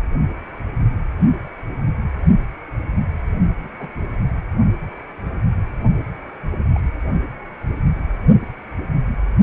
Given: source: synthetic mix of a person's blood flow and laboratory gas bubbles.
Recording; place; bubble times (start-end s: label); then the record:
Doppler ultrasound of blood flow; precordium
1.19-1.28 s: bubbles
3.63-3.71 s: bubbles
3.79-3.88 s: bubbles
6.55-6.61 s: bubbles
6.74-6.79 s: bubbles
From the record:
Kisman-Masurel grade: 121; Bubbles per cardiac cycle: 1 to 2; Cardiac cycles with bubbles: 10 to 50%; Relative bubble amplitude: barely perceptible (0.100 to 0.250); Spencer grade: 2 (many but less than half of the cardiac periods contain bubble signals, singularly or in groups); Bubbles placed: only in the low amplitude regions of the cardiac cycle